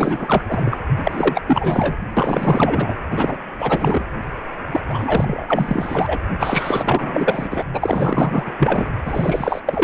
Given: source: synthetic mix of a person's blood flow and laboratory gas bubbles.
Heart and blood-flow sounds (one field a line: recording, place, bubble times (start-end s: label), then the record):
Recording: Doppler ultrasound of blood flow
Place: precordium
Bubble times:
0.00-0.44 s: bubbles
0.47-0.78 s: bubbles
0.96-1.42 s: bubbles
1.46-1.97 s: bubbles
2.17-2.94 s: bubbles
3.11-3.38 s: bubbles
3.58-4.04 s: bubbles
4.72-4.80 s: bubbles
4.88-6.18 s: bubbles
6.39-7.62 s: bubbles
7.73-8.54 s: bubbles
8.58-8.88 s: bubbles
9.05-9.61 s: bubbles
9.66-9.84 s: bubbles
From the record:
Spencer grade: 4 (maximum detectable bubble signal sounding continuously throughout systole and diastole of every cardiac period, and overriding the amplitude of the normal cardiac signals)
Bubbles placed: anywhere in the cardiac cycle